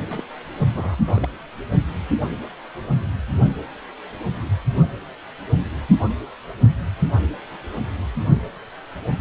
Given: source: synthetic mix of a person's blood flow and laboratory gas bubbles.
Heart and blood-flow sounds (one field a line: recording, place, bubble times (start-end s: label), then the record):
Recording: Doppler ultrasound of blood flow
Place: precordium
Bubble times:
0.10-0.23 s: bubbles
0.74-0.95 s: bubbles
1.07-1.29 s: bubbles
From the record:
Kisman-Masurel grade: 211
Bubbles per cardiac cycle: several, 3 to 8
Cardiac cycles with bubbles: 1 to 10%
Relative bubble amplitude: barely perceptible (0.100 to 0.250)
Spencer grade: 1 (occasional bubble signal discernible with the cardiac motion signal, with majority of cardiac periods free of bubbles)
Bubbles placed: only in the low amplitude regions of the cardiac cycle